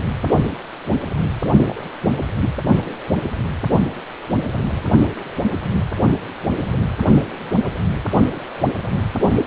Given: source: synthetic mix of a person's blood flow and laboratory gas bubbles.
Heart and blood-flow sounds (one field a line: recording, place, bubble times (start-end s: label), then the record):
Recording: Doppler ultrasound of blood flow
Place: precordium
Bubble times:
1.67-1.86 s: bubbles
2.07-2.19 s: bubbles
2.40-2.50 s: bubbles
From the record:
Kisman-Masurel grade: 211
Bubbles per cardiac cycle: several, 3 to 8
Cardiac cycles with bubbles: 1 to 10%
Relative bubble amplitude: barely perceptible (0.100 to 0.250)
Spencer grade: 1 (occasional bubble signal discernible with the cardiac motion signal, with majority of cardiac periods free of bubbles)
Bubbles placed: anywhere in the cardiac cycle